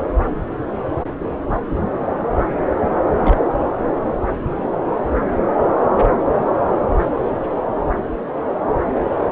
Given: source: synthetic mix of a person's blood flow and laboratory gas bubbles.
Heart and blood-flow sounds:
Doppler ultrasound of blood flow; subclavian vein
2.91-2.95 s: bubbles
3.15-3.40 s: bubbles
From the record:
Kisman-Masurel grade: 221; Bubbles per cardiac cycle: several, 3 to 8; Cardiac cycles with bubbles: 10 to 50%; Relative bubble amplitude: barely perceptible (0.100 to 0.250); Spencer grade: 2 (many but less than half of the cardiac periods contain bubble signals, singularly or in groups); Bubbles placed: anywhere in the cardiac cycle

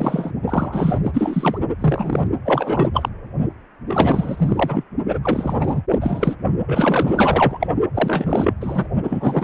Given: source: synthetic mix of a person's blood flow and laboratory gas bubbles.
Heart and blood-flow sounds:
Doppler ultrasound of blood flow; precordium
0.00-0.32 s: bubbles
0.47-1.00 s: bubbles
1.03-1.58 s: bubbles
1.79-2.27 s: bubbles
2.44-2.90 s: bubbles
2.94-3.09 s: bubbles
3.87-4.84 s: bubbles
5.08-5.18 s: bubbles
5.22-5.82 s: bubbles
5.91-5.99 s: bubbles
6.01-6.35 s: bubbles
6.67-7.67 s: bubbles
7.94-8.54 s: bubbles
8.61-8.88 s: bubbles
9.03-9.43 s: bubbles
From the record:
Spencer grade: 4 (maximum detectable bubble signal sounding continuously throughout systole and diastole of every cardiac period, and overriding the amplitude of the normal cardiac signals); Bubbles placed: only in the low amplitude regions of the cardiac cycle

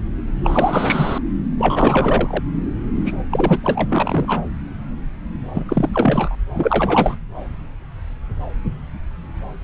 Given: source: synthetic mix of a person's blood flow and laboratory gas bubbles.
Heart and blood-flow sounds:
Doppler ultrasound of blood flow; subclavian vein
0.43-1.19 s: bubbles
1.58-2.44 s: bubbles
3.05-3.17 s: bubbles
3.30-3.58 s: bubbles
3.63-4.42 s: bubbles
5.54-5.65 s: bubbles
5.68-6.36 s: bubbles
6.54-7.15 s: bubbles
From the record:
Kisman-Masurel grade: 333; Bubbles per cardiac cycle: rolling drumbeat, 9 or more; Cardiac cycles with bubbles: 50 to 99%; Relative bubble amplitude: loud (0.450 to 0.775); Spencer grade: 3 (all of the cardiac periods contain showers or single bubble signals, but not dominating or overriding the cardiac motion signals); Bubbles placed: anywhere in the cardiac cycle

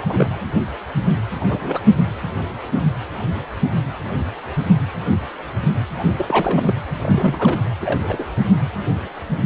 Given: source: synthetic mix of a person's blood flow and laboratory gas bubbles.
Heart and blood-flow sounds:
Doppler ultrasound of blood flow; precordium
0.00-0.30 s: bubbles
1.40-1.80 s: bubbles
5.98-6.03 s: bubbles
6.17-6.74 s: bubbles
7.01-7.59 s: bubbles
7.82-8.25 s: bubbles
From the record:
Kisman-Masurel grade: 222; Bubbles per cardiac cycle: several, 3 to 8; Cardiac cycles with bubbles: 10 to 50%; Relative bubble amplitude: moderate (0.250 to 0.450); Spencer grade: 2 (many but less than half of the cardiac periods contain bubble signals, singularly or in groups); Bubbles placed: anywhere in the cardiac cycle

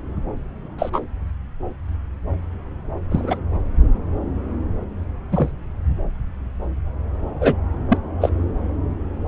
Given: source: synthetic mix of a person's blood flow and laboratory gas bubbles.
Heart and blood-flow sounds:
Doppler ultrasound of blood flow; subclavian vein
0.78-0.90 s: bubbles
0.93-1.01 s: bubbles
3.11-3.38 s: bubbles
5.32-5.52 s: bubbles
7.41-7.54 s: bubbles
7.89-7.97 s: bubbles
8.21-8.29 s: bubbles
From the record:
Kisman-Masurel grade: 123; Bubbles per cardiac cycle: 1 to 2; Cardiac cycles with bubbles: 10 to 50%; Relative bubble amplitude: loud (0.450 to 0.775); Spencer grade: 2 (many but less than half of the cardiac periods contain bubble signals, singularly or in groups); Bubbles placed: anywhere in the cardiac cycle

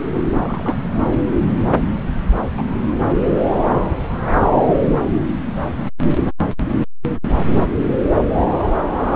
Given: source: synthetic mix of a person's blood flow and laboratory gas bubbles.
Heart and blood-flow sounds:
Doppler ultrasound of blood flow; subclavian vein
0.42-0.76 s: bubbles
2.57-2.65 s: bubbles
From the record:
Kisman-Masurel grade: 122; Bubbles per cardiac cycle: 1 to 2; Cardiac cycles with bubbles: 10 to 50%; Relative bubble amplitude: moderate (0.250 to 0.450); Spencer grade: 2 (many but less than half of the cardiac periods contain bubble signals, singularly or in groups); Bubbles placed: anywhere in the cardiac cycle

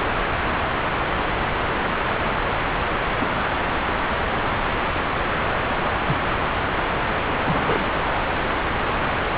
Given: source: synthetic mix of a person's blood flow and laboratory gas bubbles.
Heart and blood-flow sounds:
Doppler ultrasound of blood flow; subclavian vein
2.25-2.30 s: bubbles
3.20-3.25 s: bubbles
6.07-6.35 s: bubbles
7.43-7.92 s: bubbles
From the record:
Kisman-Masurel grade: 121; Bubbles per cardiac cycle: 1 to 2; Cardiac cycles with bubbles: 10 to 50%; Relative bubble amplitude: barely perceptible (0.100 to 0.250); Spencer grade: 2 (many but less than half of the cardiac periods contain bubble signals, singularly or in groups); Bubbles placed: anywhere in the cardiac cycle

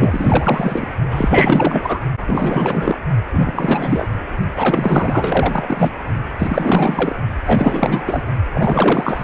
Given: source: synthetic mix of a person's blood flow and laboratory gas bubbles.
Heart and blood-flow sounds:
Doppler ultrasound of blood flow; precordium
0.00-0.96 s: bubbles
1.10-2.00 s: bubbles
2.26-2.98 s: bubbles
3.32-4.08 s: bubbles
4.54-5.91 s: bubbles
6.39-7.17 s: bubbles
7.47-8.23 s: bubbles
8.54-9.24 s: bubbles
From the record:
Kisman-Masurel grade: 444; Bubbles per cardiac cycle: continuous sound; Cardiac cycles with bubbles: 100%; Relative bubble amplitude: maximal (0.775 to 0.999); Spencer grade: 4 (maximum detectable bubble signal sounding continuously throughout systole and diastole of every cardiac period, and overriding the amplitude of the normal cardiac signals); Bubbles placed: only in the low amplitude regions of the cardiac cycle

